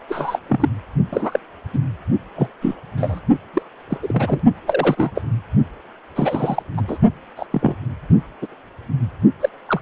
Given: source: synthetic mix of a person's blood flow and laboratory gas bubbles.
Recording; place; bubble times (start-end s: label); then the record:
Doppler ultrasound of blood flow; precordium
0.09-0.40 s: bubbles
0.48-0.71 s: bubbles
1.11-1.39 s: bubbles
1.73-1.78 s: bubbles
2.36-2.51 s: bubbles
2.61-2.75 s: bubbles
2.97-3.20 s: bubbles
3.53-3.62 s: bubbles
3.90-3.98 s: bubbles
4.02-4.39 s: bubbles
4.67-5.12 s: bubbles
5.14-5.21 s: bubbles
6.15-6.62 s: bubbles
6.77-6.81 s: bubbles
6.88-6.98 s: bubbles
7.36-7.46 s: bubbles
7.51-7.76 s: bubbles
8.42-8.47 s: bubbles
9.41-9.49 s: bubbles
9.68-9.80 s: bubbles
From the record:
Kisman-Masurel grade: 232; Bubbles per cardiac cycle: several, 3 to 8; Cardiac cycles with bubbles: 50 to 99%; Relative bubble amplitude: moderate (0.250 to 0.450); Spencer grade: 3 (all of the cardiac periods contain showers or single bubble signals, but not dominating or overriding the cardiac motion signals); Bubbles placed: only in the low amplitude regions of the cardiac cycle